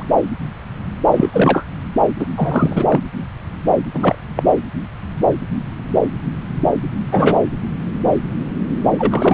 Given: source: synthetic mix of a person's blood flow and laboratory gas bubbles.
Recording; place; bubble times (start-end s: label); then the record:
Doppler ultrasound of blood flow; subclavian vein
0.00-0.06 s: bubbles
1.11-1.65 s: bubbles
2.18-2.26 s: bubbles
2.36-3.00 s: bubbles
3.94-4.17 s: bubbles
4.36-4.42 s: bubbles
7.12-7.36 s: bubbles
8.98-9.34 s: bubbles
From the record:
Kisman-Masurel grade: 223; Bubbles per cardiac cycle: several, 3 to 8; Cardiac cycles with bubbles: 10 to 50%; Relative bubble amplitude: loud (0.450 to 0.775); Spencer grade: 2 (many but less than half of the cardiac periods contain bubble signals, singularly or in groups); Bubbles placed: anywhere in the cardiac cycle